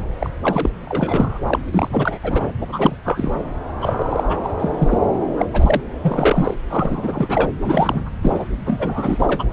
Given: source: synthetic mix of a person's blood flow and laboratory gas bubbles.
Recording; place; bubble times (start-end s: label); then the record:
Doppler ultrasound of blood flow; subclavian vein
0.19-0.30 s: bubbles
0.43-0.69 s: bubbles
0.85-1.38 s: bubbles
1.47-1.59 s: bubbles
1.72-2.19 s: bubbles
2.23-2.52 s: bubbles
2.60-2.67 s: bubbles
2.72-2.96 s: bubbles
3.04-3.33 s: bubbles
3.81-4.26 s: bubbles
4.29-4.49 s: bubbles
4.59-4.99 s: bubbles
5.38-5.46 s: bubbles
5.53-5.80 s: bubbles
6.03-6.54 s: bubbles
6.70-7.51 s: bubbles
7.64-8.05 s: bubbles
8.22-8.45 s: bubbles
8.66-9.45 s: bubbles
From the record:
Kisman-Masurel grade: 343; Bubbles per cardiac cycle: rolling drumbeat, 9 or more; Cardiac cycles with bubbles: 100%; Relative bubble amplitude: loud (0.450 to 0.775); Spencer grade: 3 (all of the cardiac periods contain showers or single bubble signals, but not dominating or overriding the cardiac motion signals); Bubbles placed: anywhere in the cardiac cycle